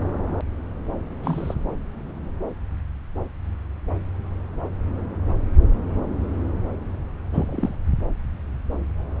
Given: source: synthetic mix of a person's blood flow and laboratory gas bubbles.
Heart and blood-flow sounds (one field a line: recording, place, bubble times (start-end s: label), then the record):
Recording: Doppler ultrasound of blood flow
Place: subclavian vein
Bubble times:
1.22-1.54 s: bubbles
7.33-7.75 s: bubbles
From the record:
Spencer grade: 1 (occasional bubble signal discernible with the cardiac motion signal, with majority of cardiac periods free of bubbles)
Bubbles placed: anywhere in the cardiac cycle